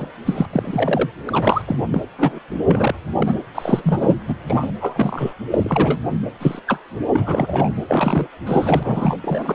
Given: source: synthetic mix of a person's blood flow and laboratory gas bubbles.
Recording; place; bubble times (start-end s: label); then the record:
Doppler ultrasound of blood flow; precordium
0.00-0.07 s: bubbles
0.26-0.46 s: bubbles
0.49-1.09 s: bubbles
1.28-1.62 s: bubbles
1.67-1.78 s: bubbles
1.92-2.02 s: bubbles
2.18-2.39 s: bubbles
2.67-2.95 s: bubbles
3.20-3.35 s: bubbles
3.55-4.15 s: bubbles
4.28-4.35 s: bubbles
4.46-4.71 s: bubbles
4.80-5.33 s: bubbles
5.50-5.98 s: bubbles
6.39-6.60 s: bubbles
6.67-6.79 s: bubbles
7.13-7.71 s: bubbles
7.88-8.27 s: bubbles
8.46-9.17 s: bubbles
9.24-9.55 s: bubbles
From the record:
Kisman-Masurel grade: 242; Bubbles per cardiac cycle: several, 3 to 8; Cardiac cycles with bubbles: 100%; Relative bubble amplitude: moderate (0.250 to 0.450); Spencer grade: 3 (all of the cardiac periods contain showers or single bubble signals, but not dominating or overriding the cardiac motion signals); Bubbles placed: anywhere in the cardiac cycle